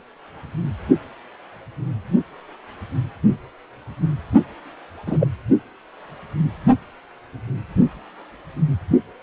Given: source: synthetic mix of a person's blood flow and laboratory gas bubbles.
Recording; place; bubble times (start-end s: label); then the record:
Doppler ultrasound of blood flow; precordium
5.06-5.27 s: bubbles
From the record:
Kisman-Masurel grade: 113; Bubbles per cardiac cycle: 1 to 2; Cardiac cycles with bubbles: 1 to 10%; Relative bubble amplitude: loud (0.450 to 0.775); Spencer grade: 1 (occasional bubble signal discernible with the cardiac motion signal, with majority of cardiac periods free of bubbles); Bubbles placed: only in the low amplitude regions of the cardiac cycle